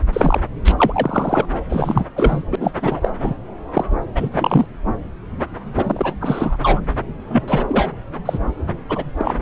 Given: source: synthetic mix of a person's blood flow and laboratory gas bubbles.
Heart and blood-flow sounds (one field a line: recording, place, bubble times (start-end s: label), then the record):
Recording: Doppler ultrasound of blood flow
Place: subclavian vein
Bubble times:
0.12-0.40 s: bubbles
0.64-0.75 s: bubbles
0.78-1.46 s: bubbles
1.70-2.04 s: bubbles
2.16-2.44 s: bubbles
2.51-2.56 s: bubbles
2.60-2.71 s: bubbles
2.81-3.10 s: bubbles
3.20-3.34 s: bubbles
3.73-3.85 s: bubbles
4.15-4.29 s: bubbles
4.31-4.66 s: bubbles
5.75-6.15 s: bubbles
6.21-6.57 s: bubbles
6.62-6.80 s: bubbles
7.29-7.91 s: bubbles
8.25-8.39 s: bubbles
8.89-9.04 s: bubbles
9.20-9.35 s: bubbles
From the record:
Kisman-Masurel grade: 243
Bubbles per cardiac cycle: several, 3 to 8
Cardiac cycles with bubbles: 100%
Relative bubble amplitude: loud (0.450 to 0.775)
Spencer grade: 3 (all of the cardiac periods contain showers or single bubble signals, but not dominating or overriding the cardiac motion signals)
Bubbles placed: anywhere in the cardiac cycle